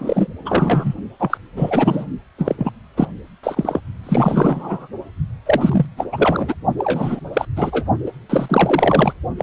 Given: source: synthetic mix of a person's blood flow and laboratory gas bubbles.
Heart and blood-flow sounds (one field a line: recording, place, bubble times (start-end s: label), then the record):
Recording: Doppler ultrasound of blood flow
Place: precordium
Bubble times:
0.00-0.27 s: bubbles
0.45-0.94 s: bubbles
1.19-1.38 s: bubbles
1.56-2.06 s: bubbles
2.38-2.72 s: bubbles
2.97-3.08 s: bubbles
3.43-3.80 s: bubbles
4.03-4.88 s: bubbles
5.46-5.86 s: bubbles
5.97-6.07 s: bubbles
6.12-6.54 s: bubbles
6.78-7.20 s: bubbles
7.33-7.45 s: bubbles
7.56-7.85 s: bubbles
8.05-8.12 s: bubbles
8.29-9.13 s: bubbles
9.38-9.43 s: bubbles
From the record:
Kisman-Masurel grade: 343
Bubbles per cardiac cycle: rolling drumbeat, 9 or more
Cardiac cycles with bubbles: 100%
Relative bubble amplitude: loud (0.450 to 0.775)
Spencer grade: 3 (all of the cardiac periods contain showers or single bubble signals, but not dominating or overriding the cardiac motion signals)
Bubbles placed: only in the low amplitude regions of the cardiac cycle